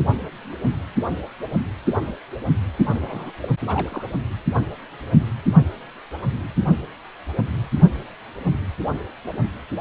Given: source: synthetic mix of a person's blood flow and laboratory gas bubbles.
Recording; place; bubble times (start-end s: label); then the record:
Doppler ultrasound of blood flow; precordium
2.94-3.32 s: bubbles
3.42-3.49 s: bubbles
3.67-4.06 s: bubbles
From the record:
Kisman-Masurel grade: 211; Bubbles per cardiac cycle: several, 3 to 8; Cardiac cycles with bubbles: 1 to 10%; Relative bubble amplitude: barely perceptible (0.100 to 0.250); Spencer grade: 1 (occasional bubble signal discernible with the cardiac motion signal, with majority of cardiac periods free of bubbles); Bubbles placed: only in the low amplitude regions of the cardiac cycle